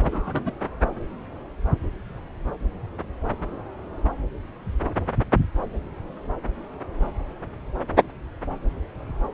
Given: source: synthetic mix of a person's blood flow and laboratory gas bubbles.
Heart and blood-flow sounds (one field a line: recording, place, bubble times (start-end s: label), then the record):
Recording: Doppler ultrasound of blood flow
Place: subclavian vein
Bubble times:
0.03-0.53 s: bubbles
From the record:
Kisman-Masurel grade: 211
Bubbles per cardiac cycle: several, 3 to 8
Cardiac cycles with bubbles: 1 to 10%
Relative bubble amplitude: barely perceptible (0.100 to 0.250)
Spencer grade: 1 (occasional bubble signal discernible with the cardiac motion signal, with majority of cardiac periods free of bubbles)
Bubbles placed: anywhere in the cardiac cycle